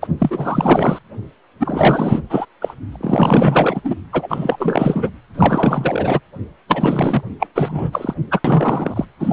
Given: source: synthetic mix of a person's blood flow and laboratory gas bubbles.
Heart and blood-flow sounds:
Doppler ultrasound of blood flow; precordium
0.02-0.07 s: bubbles
0.19-0.99 s: bubbles
1.60-2.22 s: bubbles
2.29-2.46 s: bubbles
2.61-2.74 s: bubbles
2.92-2.97 s: bubbles
3.01-3.81 s: bubbles
3.84-3.95 s: bubbles
4.12-5.11 s: bubbles
5.34-6.21 s: bubbles
6.68-7.23 s: bubbles
7.39-7.47 s: bubbles
7.55-8.14 s: bubbles
8.31-8.40 s: bubbles
8.45-9.05 s: bubbles
9.20-9.33 s: bubbles
From the record:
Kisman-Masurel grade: 444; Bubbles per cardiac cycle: continuous sound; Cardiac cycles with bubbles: 100%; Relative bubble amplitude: maximal (0.775 to 0.999); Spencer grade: 4 (maximum detectable bubble signal sounding continuously throughout systole and diastole of every cardiac period, and overriding the amplitude of the normal cardiac signals); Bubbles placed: anywhere in the cardiac cycle

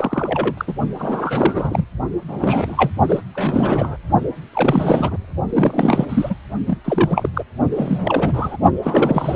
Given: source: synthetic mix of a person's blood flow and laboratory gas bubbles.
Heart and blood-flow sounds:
Doppler ultrasound of blood flow; precordium
0.00-0.73 s: bubbles
0.98-1.85 s: bubbles
2.28-2.90 s: bubbles
3.08-3.21 s: bubbles
3.34-3.97 s: bubbles
4.53-5.17 s: bubbles
5.50-6.06 s: bubbles
6.08-6.35 s: bubbles
6.67-6.78 s: bubbles
6.84-7.29 s: bubbles
7.33-7.44 s: bubbles
7.71-8.56 s: bubbles
8.83-9.36 s: bubbles
From the record:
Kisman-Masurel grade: 342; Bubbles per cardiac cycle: rolling drumbeat, 9 or more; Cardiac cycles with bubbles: 100%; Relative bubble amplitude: moderate (0.250 to 0.450); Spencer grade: 3 (all of the cardiac periods contain showers or single bubble signals, but not dominating or overriding the cardiac motion signals); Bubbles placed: only in the low amplitude regions of the cardiac cycle

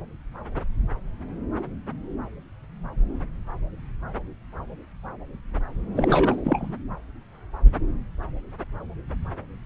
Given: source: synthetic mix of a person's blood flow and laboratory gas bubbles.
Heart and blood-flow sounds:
Doppler ultrasound of blood flow; subclavian vein
5.96-6.75 s: bubbles
From the record:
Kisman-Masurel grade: 212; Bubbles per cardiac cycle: several, 3 to 8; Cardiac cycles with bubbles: 1 to 10%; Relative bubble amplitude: moderate (0.250 to 0.450); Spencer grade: 1 (occasional bubble signal discernible with the cardiac motion signal, with majority of cardiac periods free of bubbles); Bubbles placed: anywhere in the cardiac cycle

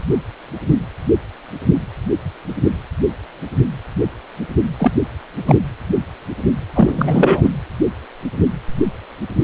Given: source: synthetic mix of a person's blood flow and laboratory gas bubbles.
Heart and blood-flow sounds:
Doppler ultrasound of blood flow; precordium
4.78-4.93 s: bubbles
5.45-5.57 s: bubbles
6.75-7.53 s: bubbles
From the record:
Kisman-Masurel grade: 223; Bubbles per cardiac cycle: several, 3 to 8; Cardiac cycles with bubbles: 10 to 50%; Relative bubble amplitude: loud (0.450 to 0.775); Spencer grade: 2 (many but less than half of the cardiac periods contain bubble signals, singularly or in groups); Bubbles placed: anywhere in the cardiac cycle

